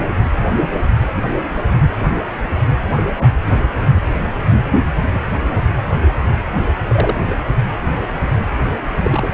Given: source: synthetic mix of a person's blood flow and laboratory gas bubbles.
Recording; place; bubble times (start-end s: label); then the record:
Doppler ultrasound of blood flow; precordium
3.17-3.30 s: bubbles
5.09-5.18 s: bubbles
6.88-7.16 s: bubbles
7.27-7.36 s: bubbles
9.03-9.29 s: bubbles
From the record:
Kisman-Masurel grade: 122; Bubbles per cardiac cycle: 1 to 2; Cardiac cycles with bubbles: 10 to 50%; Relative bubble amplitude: moderate (0.250 to 0.450); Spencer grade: 2 (many but less than half of the cardiac periods contain bubble signals, singularly or in groups); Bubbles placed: anywhere in the cardiac cycle